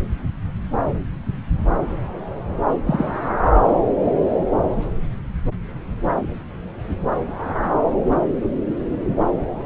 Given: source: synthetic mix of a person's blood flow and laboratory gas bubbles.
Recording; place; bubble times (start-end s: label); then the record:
Doppler ultrasound of blood flow; subclavian vein
2.87-3.12 s: bubbles
From the record:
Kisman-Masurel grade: 122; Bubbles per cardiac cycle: 1 to 2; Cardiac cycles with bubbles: 10 to 50%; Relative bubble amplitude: moderate (0.250 to 0.450); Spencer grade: 2 (many but less than half of the cardiac periods contain bubble signals, singularly or in groups); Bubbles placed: anywhere in the cardiac cycle